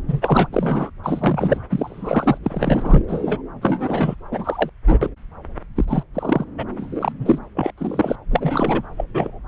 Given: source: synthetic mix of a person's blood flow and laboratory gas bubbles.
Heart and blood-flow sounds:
Doppler ultrasound of blood flow; subclavian vein
0.08-0.47 s: bubbles
0.52-0.90 s: bubbles
1.04-1.62 s: bubbles
1.71-2.38 s: bubbles
2.44-3.04 s: bubbles
3.08-3.42 s: bubbles
3.62-4.15 s: bubbles
4.31-4.70 s: bubbles
4.87-4.98 s: bubbles
5.01-5.09 s: bubbles
5.75-5.85 s: bubbles
5.88-6.03 s: bubbles
6.14-6.45 s: bubbles
6.58-6.64 s: bubbles
6.76-7.12 s: bubbles
7.20-7.38 s: bubbles
7.55-7.72 s: bubbles
7.77-8.16 s: bubbles
8.31-8.83 s: bubbles
8.97-9.04 s: bubbles
9.13-9.42 s: bubbles
From the record:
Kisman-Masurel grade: 243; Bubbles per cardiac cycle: several, 3 to 8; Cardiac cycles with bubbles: 100%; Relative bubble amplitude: loud (0.450 to 0.775); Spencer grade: 3 (all of the cardiac periods contain showers or single bubble signals, but not dominating or overriding the cardiac motion signals); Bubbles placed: anywhere in the cardiac cycle

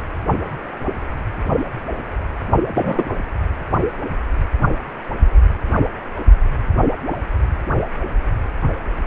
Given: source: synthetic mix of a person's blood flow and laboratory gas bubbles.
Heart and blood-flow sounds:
Doppler ultrasound of blood flow; precordium
2.74-3.04 s: bubbles
From the record:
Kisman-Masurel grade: 113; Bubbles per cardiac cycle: 1 to 2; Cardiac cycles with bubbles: 1 to 10%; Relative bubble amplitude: loud (0.450 to 0.775); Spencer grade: 1 (occasional bubble signal discernible with the cardiac motion signal, with majority of cardiac periods free of bubbles); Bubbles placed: anywhere in the cardiac cycle

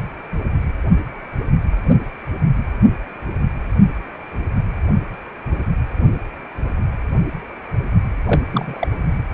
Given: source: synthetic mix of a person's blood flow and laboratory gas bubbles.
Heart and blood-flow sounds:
Doppler ultrasound of blood flow; precordium
8.26-8.42 s: bubbles
8.52-8.88 s: bubbles
From the record:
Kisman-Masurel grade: 212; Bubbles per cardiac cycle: several, 3 to 8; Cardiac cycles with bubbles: 1 to 10%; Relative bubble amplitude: moderate (0.250 to 0.450); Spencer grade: 1 (occasional bubble signal discernible with the cardiac motion signal, with majority of cardiac periods free of bubbles); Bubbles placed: anywhere in the cardiac cycle

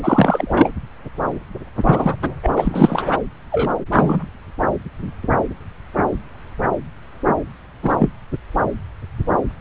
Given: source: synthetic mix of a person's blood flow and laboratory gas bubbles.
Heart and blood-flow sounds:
Doppler ultrasound of blood flow; subclavian vein
0.03-0.69 s: bubbles
1.83-2.16 s: bubbles
2.21-2.35 s: bubbles
2.43-3.08 s: bubbles
3.52-3.74 s: bubbles
3.92-4.27 s: bubbles
7.83-7.95 s: bubbles
7.99-8.10 s: bubbles
From the record:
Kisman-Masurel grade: 223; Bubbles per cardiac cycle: several, 3 to 8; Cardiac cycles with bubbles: 10 to 50%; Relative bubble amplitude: loud (0.450 to 0.775); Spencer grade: 2 (many but less than half of the cardiac periods contain bubble signals, singularly or in groups); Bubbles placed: anywhere in the cardiac cycle

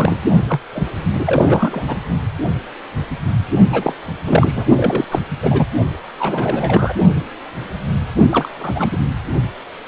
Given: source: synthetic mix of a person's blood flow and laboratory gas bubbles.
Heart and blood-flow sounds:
Doppler ultrasound of blood flow; precordium
0.00-0.17 s: bubbles
0.47-0.60 s: bubbles
0.73-0.88 s: bubbles
1.16-1.84 s: bubbles
1.88-1.97 s: bubbles
3.72-3.94 s: bubbles
4.26-4.66 s: bubbles
4.76-5.04 s: bubbles
5.11-5.21 s: bubbles
5.42-5.67 s: bubbles
6.19-6.95 s: bubbles
8.31-8.49 s: bubbles
8.58-8.99 s: bubbles
From the record:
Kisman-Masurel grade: 332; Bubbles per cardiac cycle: rolling drumbeat, 9 or more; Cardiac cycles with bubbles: 50 to 99%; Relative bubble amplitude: moderate (0.250 to 0.450); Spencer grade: 3 (all of the cardiac periods contain showers or single bubble signals, but not dominating or overriding the cardiac motion signals); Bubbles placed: only in the low amplitude regions of the cardiac cycle

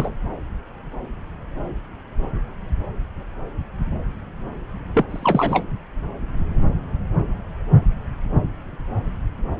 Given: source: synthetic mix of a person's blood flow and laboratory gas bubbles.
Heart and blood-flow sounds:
Doppler ultrasound of blood flow; subclavian vein
0.00-0.14 s: bubbles
4.94-5.04 s: bubbles
5.09-5.66 s: bubbles
From the record:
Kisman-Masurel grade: 222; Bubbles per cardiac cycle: several, 3 to 8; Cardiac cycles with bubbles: 10 to 50%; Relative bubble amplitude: moderate (0.250 to 0.450); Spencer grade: 2 (many but less than half of the cardiac periods contain bubble signals, singularly or in groups); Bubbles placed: anywhere in the cardiac cycle

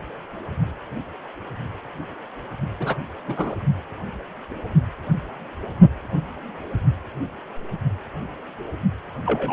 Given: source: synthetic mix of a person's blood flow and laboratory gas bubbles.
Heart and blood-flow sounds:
Doppler ultrasound of blood flow; precordium
2.79-2.96 s: bubbles
3.27-3.55 s: bubbles
9.26-9.53 s: bubbles
From the record:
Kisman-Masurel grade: 122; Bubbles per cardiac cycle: 1 to 2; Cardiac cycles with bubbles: 10 to 50%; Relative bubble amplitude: moderate (0.250 to 0.450); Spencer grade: 2 (many but less than half of the cardiac periods contain bubble signals, singularly or in groups); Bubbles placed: only in the low amplitude regions of the cardiac cycle

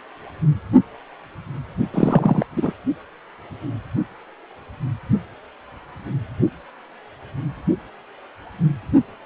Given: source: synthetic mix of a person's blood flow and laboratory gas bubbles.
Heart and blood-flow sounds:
Doppler ultrasound of blood flow; precordium
1.94-2.46 s: bubbles
2.56-2.73 s: bubbles
From the record:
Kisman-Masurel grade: 213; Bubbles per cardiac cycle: several, 3 to 8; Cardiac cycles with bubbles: 1 to 10%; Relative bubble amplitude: loud (0.450 to 0.775); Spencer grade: 1 (occasional bubble signal discernible with the cardiac motion signal, with majority of cardiac periods free of bubbles); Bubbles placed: only in the low amplitude regions of the cardiac cycle

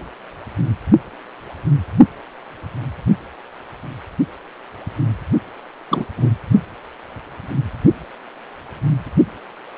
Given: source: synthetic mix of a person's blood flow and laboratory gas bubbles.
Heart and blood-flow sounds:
Doppler ultrasound of blood flow; precordium
5.90-6.05 s: bubbles
6.17-6.29 s: bubbles
From the record:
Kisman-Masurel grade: 212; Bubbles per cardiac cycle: several, 3 to 8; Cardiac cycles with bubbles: 1 to 10%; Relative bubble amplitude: moderate (0.250 to 0.450); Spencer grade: 1 (occasional bubble signal discernible with the cardiac motion signal, with majority of cardiac periods free of bubbles); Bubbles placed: only in the low amplitude regions of the cardiac cycle

